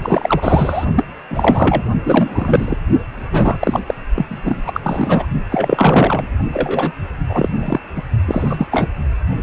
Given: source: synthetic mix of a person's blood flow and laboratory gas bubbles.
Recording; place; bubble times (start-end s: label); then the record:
Doppler ultrasound of blood flow; precordium
0.02-0.85 s: bubbles
0.95-1.05 s: bubbles
1.30-1.83 s: bubbles
2.04-2.77 s: bubbles
3.32-3.80 s: bubbles
3.87-3.94 s: bubbles
4.16-4.25 s: bubbles
4.28-5.27 s: bubbles
5.50-6.27 s: bubbles
6.53-6.92 s: bubbles
7.29-7.49 s: bubbles
7.58-7.80 s: bubbles
7.96-8.02 s: bubbles
8.28-8.67 s: bubbles
8.71-8.88 s: bubbles
From the record:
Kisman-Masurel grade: 343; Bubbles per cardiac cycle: rolling drumbeat, 9 or more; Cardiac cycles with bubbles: 100%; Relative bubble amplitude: loud (0.450 to 0.775); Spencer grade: 3 (all of the cardiac periods contain showers or single bubble signals, but not dominating or overriding the cardiac motion signals); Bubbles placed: only in the low amplitude regions of the cardiac cycle